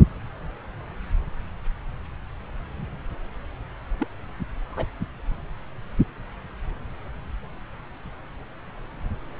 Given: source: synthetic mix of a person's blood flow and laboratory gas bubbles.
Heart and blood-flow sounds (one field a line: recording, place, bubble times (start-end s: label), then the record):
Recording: Doppler ultrasound of blood flow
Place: subclavian vein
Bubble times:
3.98-4.08 s: bubbles
4.70-4.88 s: bubbles
From the record:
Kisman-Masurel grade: 111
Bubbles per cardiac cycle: 1 to 2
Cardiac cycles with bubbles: 1 to 10%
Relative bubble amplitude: barely perceptible (0.100 to 0.250)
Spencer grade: 1 (occasional bubble signal discernible with the cardiac motion signal, with majority of cardiac periods free of bubbles)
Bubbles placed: anywhere in the cardiac cycle